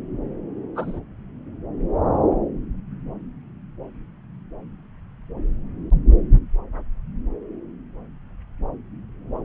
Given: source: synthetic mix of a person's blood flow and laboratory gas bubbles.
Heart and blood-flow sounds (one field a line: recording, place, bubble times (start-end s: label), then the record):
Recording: Doppler ultrasound of blood flow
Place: subclavian vein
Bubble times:
0.76-0.99 s: bubbles
From the record:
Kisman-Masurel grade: 112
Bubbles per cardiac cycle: 1 to 2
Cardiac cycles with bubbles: 1 to 10%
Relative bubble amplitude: moderate (0.250 to 0.450)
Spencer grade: 1 (occasional bubble signal discernible with the cardiac motion signal, with majority of cardiac periods free of bubbles)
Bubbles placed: anywhere in the cardiac cycle